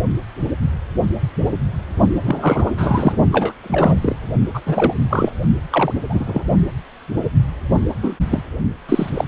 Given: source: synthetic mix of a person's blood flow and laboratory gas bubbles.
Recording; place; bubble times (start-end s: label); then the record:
Doppler ultrasound of blood flow; precordium
2.25-2.71 s: bubbles
2.77-3.17 s: bubbles
3.32-3.54 s: bubbles
3.62-4.16 s: bubbles
4.54-4.61 s: bubbles
4.66-4.94 s: bubbles
5.09-5.31 s: bubbles
5.71-5.92 s: bubbles
6.09-6.44 s: bubbles
8.02-8.16 s: bubbles
8.29-8.42 s: bubbles
8.88-9.10 s: bubbles
9.14-9.24 s: bubbles
From the record:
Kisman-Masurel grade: 233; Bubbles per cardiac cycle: several, 3 to 8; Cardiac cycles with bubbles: 50 to 99%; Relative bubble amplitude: loud (0.450 to 0.775); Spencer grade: 3 (all of the cardiac periods contain showers or single bubble signals, but not dominating or overriding the cardiac motion signals); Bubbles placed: only in the low amplitude regions of the cardiac cycle